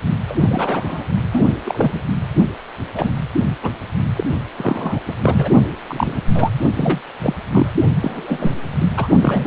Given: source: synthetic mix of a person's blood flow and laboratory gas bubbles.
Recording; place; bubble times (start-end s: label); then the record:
Doppler ultrasound of blood flow; precordium
0.27-0.35 s: bubbles
0.40-1.04 s: bubbles
1.32-1.48 s: bubbles
1.65-2.02 s: bubbles
2.93-3.13 s: bubbles
3.62-3.72 s: bubbles
4.16-4.24 s: bubbles
4.58-5.01 s: bubbles
5.07-5.15 s: bubbles
5.23-5.49 s: bubbles
5.89-6.21 s: bubbles
6.34-6.51 s: bubbles
6.74-7.01 s: bubbles
7.23-7.35 s: bubbles
7.52-7.71 s: bubbles
8.00-8.54 s: bubbles
8.78-8.90 s: bubbles
8.96-9.08 s: bubbles
9.22-9.47 s: bubbles
From the record:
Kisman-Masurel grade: 242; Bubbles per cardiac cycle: several, 3 to 8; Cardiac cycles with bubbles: 100%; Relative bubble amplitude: moderate (0.250 to 0.450); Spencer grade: 3 (all of the cardiac periods contain showers or single bubble signals, but not dominating or overriding the cardiac motion signals); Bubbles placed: only in the low amplitude regions of the cardiac cycle